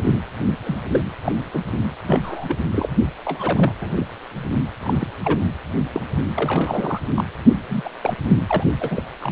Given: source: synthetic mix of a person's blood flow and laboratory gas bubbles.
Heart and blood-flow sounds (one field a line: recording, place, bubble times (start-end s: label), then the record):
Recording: Doppler ultrasound of blood flow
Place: precordium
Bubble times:
0.03-0.25 s: bubbles
0.65-0.81 s: bubbles
0.89-1.02 s: bubbles
1.21-1.32 s: bubbles
1.53-1.60 s: bubbles
2.07-2.19 s: bubbles
2.23-2.56 s: bubbles
2.71-2.88 s: bubbles
3.24-3.75 s: bubbles
3.81-4.07 s: bubbles
4.83-5.08 s: bubbles
5.23-5.39 s: bubbles
5.43-5.48 s: bubbles
5.93-6.02 s: bubbles
6.35-7.01 s: bubbles
7.15-7.24 s: bubbles
7.68-7.89 s: bubbles
8.02-8.13 s: bubbles
8.47-8.63 s: bubbles
8.80-9.02 s: bubbles
9.21-9.32 s: bubbles
From the record:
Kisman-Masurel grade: 242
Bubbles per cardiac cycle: several, 3 to 8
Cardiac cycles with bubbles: 100%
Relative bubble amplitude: moderate (0.250 to 0.450)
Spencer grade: 3 (all of the cardiac periods contain showers or single bubble signals, but not dominating or overriding the cardiac motion signals)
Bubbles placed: only in the low amplitude regions of the cardiac cycle